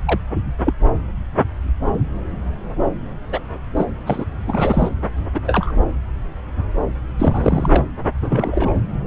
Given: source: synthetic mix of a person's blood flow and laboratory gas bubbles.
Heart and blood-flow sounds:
Doppler ultrasound of blood flow; subclavian vein
0.05-0.20 s: bubbles
0.65-0.73 s: bubbles
3.30-3.43 s: bubbles
3.76-3.85 s: bubbles
4.06-4.25 s: bubbles
4.46-4.89 s: bubbles
5.34-5.41 s: bubbles
5.46-5.72 s: bubbles
7.17-7.85 s: bubbles
8.21-8.75 s: bubbles
From the record:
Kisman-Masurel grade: 233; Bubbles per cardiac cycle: several, 3 to 8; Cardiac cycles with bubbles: 50 to 99%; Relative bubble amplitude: loud (0.450 to 0.775); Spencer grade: 3 (all of the cardiac periods contain showers or single bubble signals, but not dominating or overriding the cardiac motion signals); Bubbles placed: anywhere in the cardiac cycle

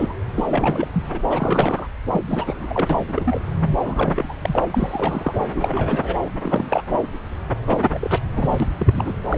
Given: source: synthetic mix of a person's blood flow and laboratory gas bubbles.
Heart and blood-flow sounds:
Doppler ultrasound of blood flow; subclavian vein
0.00-0.15 s: bubbles
0.35-0.44 s: bubbles
0.49-0.88 s: bubbles
0.93-1.03 s: bubbles
1.08-1.20 s: bubbles
1.29-1.87 s: bubbles
2.11-2.21 s: bubbles
2.27-3.04 s: bubbles
3.08-3.41 s: bubbles
3.72-4.34 s: bubbles
4.42-5.33 s: bubbles
5.53-6.18 s: bubbles
6.25-6.29 s: bubbles
6.43-6.82 s: bubbles
6.88-7.12 s: bubbles
7.67-8.18 s: bubbles
8.35-8.67 s: bubbles
8.78-9.14 s: bubbles
9.30-9.38 s: bubbles
From the record:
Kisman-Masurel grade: 342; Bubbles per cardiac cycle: rolling drumbeat, 9 or more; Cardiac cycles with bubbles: 100%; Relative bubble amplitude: moderate (0.250 to 0.450); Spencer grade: 3 (all of the cardiac periods contain showers or single bubble signals, but not dominating or overriding the cardiac motion signals); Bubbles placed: anywhere in the cardiac cycle

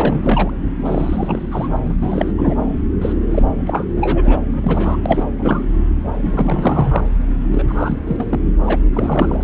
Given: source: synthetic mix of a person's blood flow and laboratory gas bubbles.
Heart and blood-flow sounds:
Doppler ultrasound of blood flow; subclavian vein
0.00-0.58 s: bubbles
0.85-1.69 s: bubbles
1.89-1.95 s: bubbles
2.02-2.33 s: bubbles
2.38-2.54 s: bubbles
3.01-3.13 s: bubbles
3.31-3.43 s: bubbles
3.66-3.85 s: bubbles
3.96-4.39 s: bubbles
4.53-4.97 s: bubbles
5.05-5.23 s: bubbles
5.38-5.63 s: bubbles
6.14-7.07 s: bubbles
7.50-7.63 s: bubbles
7.68-7.96 s: bubbles
8.07-8.24 s: bubbles
8.29-8.39 s: bubbles
8.66-8.80 s: bubbles
8.93-9.42 s: bubbles
From the record:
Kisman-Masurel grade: 342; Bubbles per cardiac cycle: rolling drumbeat, 9 or more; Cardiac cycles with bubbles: 100%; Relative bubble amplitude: moderate (0.250 to 0.450); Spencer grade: 3 (all of the cardiac periods contain showers or single bubble signals, but not dominating or overriding the cardiac motion signals); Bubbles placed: anywhere in the cardiac cycle

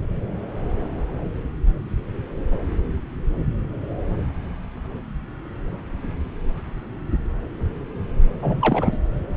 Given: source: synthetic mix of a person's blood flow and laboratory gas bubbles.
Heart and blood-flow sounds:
Doppler ultrasound of blood flow; subclavian vein
8.42-8.97 s: bubbles
From the record:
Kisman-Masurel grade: 212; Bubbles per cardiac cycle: several, 3 to 8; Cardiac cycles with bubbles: 1 to 10%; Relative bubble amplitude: moderate (0.250 to 0.450); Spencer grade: 1 (occasional bubble signal discernible with the cardiac motion signal, with majority of cardiac periods free of bubbles); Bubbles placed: anywhere in the cardiac cycle

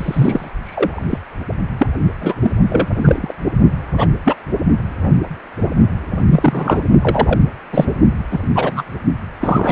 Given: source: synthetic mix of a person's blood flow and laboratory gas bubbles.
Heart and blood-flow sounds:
Doppler ultrasound of blood flow; precordium
0.00-0.51 s: bubbles
0.63-1.05 s: bubbles
1.09-1.18 s: bubbles
1.78-1.87 s: bubbles
2.20-2.34 s: bubbles
2.42-2.51 s: bubbles
2.69-2.87 s: bubbles
2.95-3.32 s: bubbles
3.97-4.08 s: bubbles
4.25-4.34 s: bubbles
6.29-6.81 s: bubbles
7.01-7.38 s: bubbles
7.72-7.85 s: bubbles
8.29-8.40 s: bubbles
8.54-8.83 s: bubbles
9.41-9.72 s: bubbles
From the record:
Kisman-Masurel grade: 233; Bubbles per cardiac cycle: several, 3 to 8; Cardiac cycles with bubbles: 50 to 99%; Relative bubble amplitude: loud (0.450 to 0.775); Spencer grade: 3 (all of the cardiac periods contain showers or single bubble signals, but not dominating or overriding the cardiac motion signals); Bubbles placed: only in the low amplitude regions of the cardiac cycle

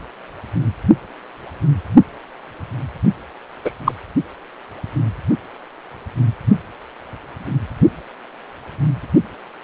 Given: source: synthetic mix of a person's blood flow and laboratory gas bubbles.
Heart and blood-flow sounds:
Doppler ultrasound of blood flow; precordium
3.65-3.71 s: bubbles
3.84-3.92 s: bubbles
From the record:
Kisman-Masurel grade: 123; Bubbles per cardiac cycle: 1 to 2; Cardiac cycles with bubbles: 10 to 50%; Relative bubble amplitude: loud (0.450 to 0.775); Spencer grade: 2 (many but less than half of the cardiac periods contain bubble signals, singularly or in groups); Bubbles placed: only in the low amplitude regions of the cardiac cycle

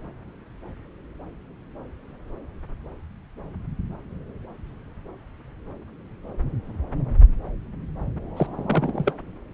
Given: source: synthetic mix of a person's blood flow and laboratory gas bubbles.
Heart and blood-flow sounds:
Doppler ultrasound of blood flow; subclavian vein
8.37-8.46 s: bubbles
8.55-9.13 s: bubbles
From the record:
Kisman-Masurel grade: 212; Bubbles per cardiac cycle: several, 3 to 8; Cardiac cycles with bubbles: 1 to 10%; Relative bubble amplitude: moderate (0.250 to 0.450); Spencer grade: 1 (occasional bubble signal discernible with the cardiac motion signal, with majority of cardiac periods free of bubbles); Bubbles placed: anywhere in the cardiac cycle

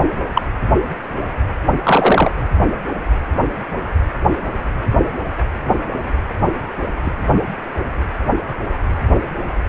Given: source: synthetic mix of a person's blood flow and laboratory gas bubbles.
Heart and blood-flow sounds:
Doppler ultrasound of blood flow; precordium
0.34-0.42 s: bubbles
1.83-2.31 s: bubbles
7.05-7.10 s: bubbles
From the record:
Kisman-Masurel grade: 123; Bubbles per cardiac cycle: 1 to 2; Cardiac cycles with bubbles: 10 to 50%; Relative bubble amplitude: loud (0.450 to 0.775); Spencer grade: 2 (many but less than half of the cardiac periods contain bubble signals, singularly or in groups); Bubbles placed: anywhere in the cardiac cycle

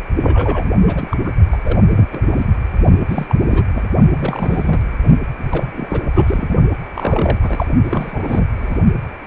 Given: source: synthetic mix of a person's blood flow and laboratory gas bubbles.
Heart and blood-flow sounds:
Doppler ultrasound of blood flow; precordium
0.17-0.69 s: bubbles
0.87-1.17 s: bubbles
1.25-1.30 s: bubbles
1.52-1.57 s: bubbles
1.64-2.28 s: bubbles
2.31-2.46 s: bubbles
3.07-3.35 s: bubbles
3.47-3.63 s: bubbles
3.75-3.82 s: bubbles
4.15-4.81 s: bubbles
5.50-6.02 s: bubbles
6.14-6.54 s: bubbles
6.94-7.38 s: bubbles
7.42-7.67 s: bubbles
7.84-8.47 s: bubbles
8.56-8.79 s: bubbles
From the record:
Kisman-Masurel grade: 332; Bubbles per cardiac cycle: rolling drumbeat, 9 or more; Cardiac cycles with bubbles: 50 to 99%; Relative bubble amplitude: moderate (0.250 to 0.450); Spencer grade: 3 (all of the cardiac periods contain showers or single bubble signals, but not dominating or overriding the cardiac motion signals); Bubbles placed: only in the low amplitude regions of the cardiac cycle

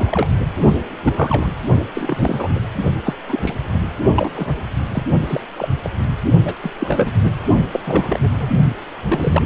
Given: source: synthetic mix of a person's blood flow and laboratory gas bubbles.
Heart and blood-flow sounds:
Doppler ultrasound of blood flow; precordium
0.00-0.27 s: bubbles
0.45-0.53 s: bubbles
1.03-1.49 s: bubbles
1.94-2.60 s: bubbles
3.03-3.13 s: bubbles
3.27-3.54 s: bubbles
3.74-3.80 s: bubbles
4.15-4.31 s: bubbles
4.36-4.54 s: bubbles
4.93-5.06 s: bubbles
5.27-5.41 s: bubbles
5.57-5.69 s: bubbles
5.84-5.90 s: bubbles
6.45-6.54 s: bubbles
6.62-6.71 s: bubbles
6.79-7.12 s: bubbles
7.24-7.32 s: bubbles
7.73-7.80 s: bubbles
7.86-8.49 s: bubbles
9.09-9.43 s: bubbles
From the record:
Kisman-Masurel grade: 242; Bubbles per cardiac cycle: several, 3 to 8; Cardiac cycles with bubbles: 100%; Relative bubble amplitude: moderate (0.250 to 0.450); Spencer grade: 3 (all of the cardiac periods contain showers or single bubble signals, but not dominating or overriding the cardiac motion signals); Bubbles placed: only in the low amplitude regions of the cardiac cycle

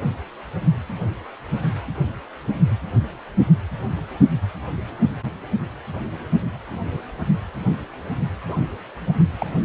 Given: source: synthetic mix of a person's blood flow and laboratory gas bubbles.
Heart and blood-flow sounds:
Doppler ultrasound of blood flow; precordium
8.48-8.57 s: bubbles
9.39-9.46 s: bubbles
From the record:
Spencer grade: 2 (many but less than half of the cardiac periods contain bubble signals, singularly or in groups); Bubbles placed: only in the low amplitude regions of the cardiac cycle

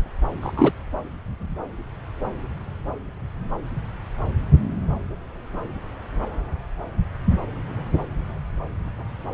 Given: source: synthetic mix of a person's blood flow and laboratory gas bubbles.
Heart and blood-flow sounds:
Doppler ultrasound of blood flow; subclavian vein
0.41-0.73 s: bubbles
From the record:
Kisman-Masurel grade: 113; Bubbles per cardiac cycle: 1 to 2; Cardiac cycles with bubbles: 1 to 10%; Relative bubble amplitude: loud (0.450 to 0.775); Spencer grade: 1 (occasional bubble signal discernible with the cardiac motion signal, with majority of cardiac periods free of bubbles); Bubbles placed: anywhere in the cardiac cycle

